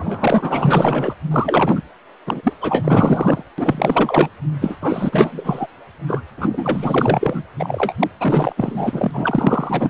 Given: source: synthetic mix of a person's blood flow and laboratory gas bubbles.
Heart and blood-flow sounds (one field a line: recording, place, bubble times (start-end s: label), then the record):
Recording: Doppler ultrasound of blood flow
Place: precordium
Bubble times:
0.00-1.15 s: bubbles
1.31-1.82 s: bubbles
2.26-2.53 s: bubbles
2.60-3.43 s: bubbles
3.58-4.29 s: bubbles
4.61-4.77 s: bubbles
4.81-5.67 s: bubbles
6.07-6.22 s: bubbles
6.37-7.43 s: bubbles
7.59-7.93 s: bubbles
8.00-8.07 s: bubbles
8.20-8.53 s: bubbles
8.56-9.90 s: bubbles
From the record:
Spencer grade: 4 (maximum detectable bubble signal sounding continuously throughout systole and diastole of every cardiac period, and overriding the amplitude of the normal cardiac signals)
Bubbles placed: anywhere in the cardiac cycle